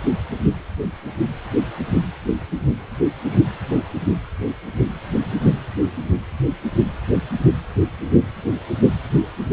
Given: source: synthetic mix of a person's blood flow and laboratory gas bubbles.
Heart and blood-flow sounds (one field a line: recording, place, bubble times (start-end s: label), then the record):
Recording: Doppler ultrasound of blood flow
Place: precordium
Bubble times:
3.28-3.39 s: bubbles
From the record:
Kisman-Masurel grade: 112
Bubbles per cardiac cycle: 1 to 2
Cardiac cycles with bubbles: 1 to 10%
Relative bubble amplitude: moderate (0.250 to 0.450)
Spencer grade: 1 (occasional bubble signal discernible with the cardiac motion signal, with majority of cardiac periods free of bubbles)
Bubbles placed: anywhere in the cardiac cycle